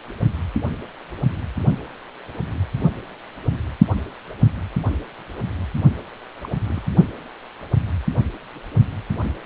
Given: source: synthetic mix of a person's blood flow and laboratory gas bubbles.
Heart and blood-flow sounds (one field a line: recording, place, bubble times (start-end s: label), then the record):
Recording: Doppler ultrasound of blood flow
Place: precordium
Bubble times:
6.44-6.48 s: bubbles
6.65-6.88 s: bubbles
From the record:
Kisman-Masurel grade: 211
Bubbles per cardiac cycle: several, 3 to 8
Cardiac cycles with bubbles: 1 to 10%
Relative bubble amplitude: barely perceptible (0.100 to 0.250)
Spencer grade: 1 (occasional bubble signal discernible with the cardiac motion signal, with majority of cardiac periods free of bubbles)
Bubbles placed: only in the low amplitude regions of the cardiac cycle